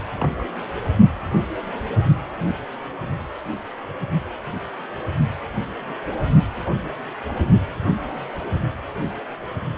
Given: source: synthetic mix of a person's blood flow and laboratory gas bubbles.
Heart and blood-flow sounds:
Doppler ultrasound of blood flow; precordium
0.16-0.47 s: bubbles
From the record:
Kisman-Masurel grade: 111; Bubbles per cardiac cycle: 1 to 2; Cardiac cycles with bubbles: 1 to 10%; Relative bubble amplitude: barely perceptible (0.100 to 0.250); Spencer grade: 1 (occasional bubble signal discernible with the cardiac motion signal, with majority of cardiac periods free of bubbles); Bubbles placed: only in the low amplitude regions of the cardiac cycle

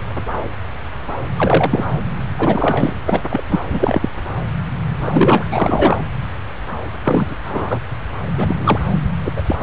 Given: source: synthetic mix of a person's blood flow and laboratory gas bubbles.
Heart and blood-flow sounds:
Doppler ultrasound of blood flow; subclavian vein
1.36-1.84 s: bubbles
2.36-2.93 s: bubbles
3.06-3.21 s: bubbles
3.29-3.44 s: bubbles
3.49-3.59 s: bubbles
3.69-4.10 s: bubbles
4.99-5.47 s: bubbles
5.50-6.02 s: bubbles
7.03-7.35 s: bubbles
7.48-7.80 s: bubbles
8.37-8.79 s: bubbles
9.24-9.32 s: bubbles
9.36-9.42 s: bubbles
9.46-9.56 s: bubbles
9.59-9.63 s: bubbles
From the record:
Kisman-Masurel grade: 233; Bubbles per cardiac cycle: several, 3 to 8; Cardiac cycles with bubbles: 50 to 99%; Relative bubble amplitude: loud (0.450 to 0.775); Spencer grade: 3 (all of the cardiac periods contain showers or single bubble signals, but not dominating or overriding the cardiac motion signals); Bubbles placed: anywhere in the cardiac cycle

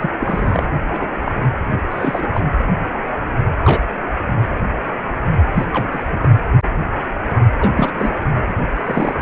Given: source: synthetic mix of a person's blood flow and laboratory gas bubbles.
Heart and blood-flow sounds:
Doppler ultrasound of blood flow; precordium
0.00-0.11 s: bubbles
0.21-0.68 s: bubbles
0.87-1.08 s: bubbles
1.25-1.47 s: bubbles
1.90-2.30 s: bubbles
2.33-2.40 s: bubbles
3.65-3.85 s: bubbles
5.54-5.67 s: bubbles
5.72-6.04 s: bubbles
6.12-6.17 s: bubbles
6.21-6.29 s: bubbles
7.59-7.70 s: bubbles
7.75-7.92 s: bubbles
7.96-8.19 s: bubbles
8.47-8.55 s: bubbles
8.74-9.22 s: bubbles
From the record:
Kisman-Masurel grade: 232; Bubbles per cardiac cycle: several, 3 to 8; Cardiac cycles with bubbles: 50 to 99%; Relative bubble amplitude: moderate (0.250 to 0.450); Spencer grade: 3 (all of the cardiac periods contain showers or single bubble signals, but not dominating or overriding the cardiac motion signals); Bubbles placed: anywhere in the cardiac cycle

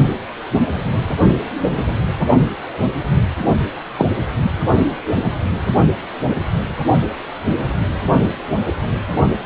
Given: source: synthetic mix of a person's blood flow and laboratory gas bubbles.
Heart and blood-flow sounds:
Doppler ultrasound of blood flow; precordium
3.96-4.05 s: bubbles
From the record:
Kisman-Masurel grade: 113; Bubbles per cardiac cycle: 1 to 2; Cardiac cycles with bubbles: 1 to 10%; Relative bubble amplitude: loud (0.450 to 0.775); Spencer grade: 1 (occasional bubble signal discernible with the cardiac motion signal, with majority of cardiac periods free of bubbles); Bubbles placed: anywhere in the cardiac cycle

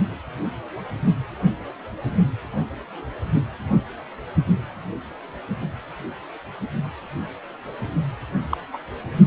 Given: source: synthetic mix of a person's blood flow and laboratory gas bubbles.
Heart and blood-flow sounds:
Doppler ultrasound of blood flow; precordium
8.49-8.57 s: bubbles
8.73-8.78 s: bubbles
From the record:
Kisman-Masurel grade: 122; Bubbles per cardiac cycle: 1 to 2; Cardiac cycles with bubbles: 10 to 50%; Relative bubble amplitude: moderate (0.250 to 0.450); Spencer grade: 2 (many but less than half of the cardiac periods contain bubble signals, singularly or in groups); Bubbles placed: only in the low amplitude regions of the cardiac cycle

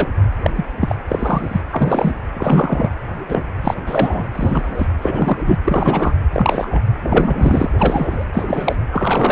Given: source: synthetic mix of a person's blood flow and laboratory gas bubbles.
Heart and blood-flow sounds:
Doppler ultrasound of blood flow; precordium
0.00-0.08 s: bubbles
0.42-0.50 s: bubbles
0.55-0.65 s: bubbles
0.81-0.96 s: bubbles
1.08-1.62 s: bubbles
1.72-2.15 s: bubbles
2.34-2.89 s: bubbles
3.28-3.48 s: bubbles
3.61-3.74 s: bubbles
3.86-4.27 s: bubbles
4.33-4.86 s: bubbles
5.01-5.37 s: bubbles
5.43-5.57 s: bubbles
5.64-6.13 s: bubbles
6.33-6.82 s: bubbles
7.03-7.70 s: bubbles
7.77-8.27 s: bubbles
8.33-8.77 s: bubbles
8.91-9.32 s: bubbles
From the record:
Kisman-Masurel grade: 233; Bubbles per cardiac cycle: several, 3 to 8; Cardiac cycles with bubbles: 50 to 99%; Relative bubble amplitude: loud (0.450 to 0.775); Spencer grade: 3 (all of the cardiac periods contain showers or single bubble signals, but not dominating or overriding the cardiac motion signals); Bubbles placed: anywhere in the cardiac cycle

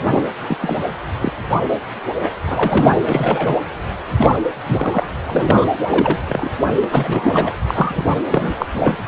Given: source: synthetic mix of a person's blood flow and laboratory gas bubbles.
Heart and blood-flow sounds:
Doppler ultrasound of blood flow; precordium
0.02-0.23 s: bubbles
0.48-0.57 s: bubbles
0.61-0.77 s: bubbles
1.21-1.32 s: bubbles
1.69-1.77 s: bubbles
2.23-2.31 s: bubbles
2.46-2.98 s: bubbles
3.06-3.55 s: bubbles
4.17-4.38 s: bubbles
4.66-5.06 s: bubbles
5.26-5.66 s: bubbles
5.87-6.19 s: bubbles
6.29-6.49 s: bubbles
6.83-6.86 s: bubbles
6.90-7.55 s: bubbles
7.67-8.03 s: bubbles
8.31-8.53 s: bubbles
8.59-8.66 s: bubbles
8.73-8.98 s: bubbles
From the record:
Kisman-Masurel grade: 242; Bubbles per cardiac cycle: several, 3 to 8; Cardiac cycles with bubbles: 100%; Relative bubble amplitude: moderate (0.250 to 0.450); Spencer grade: 3 (all of the cardiac periods contain showers or single bubble signals, but not dominating or overriding the cardiac motion signals); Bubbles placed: anywhere in the cardiac cycle

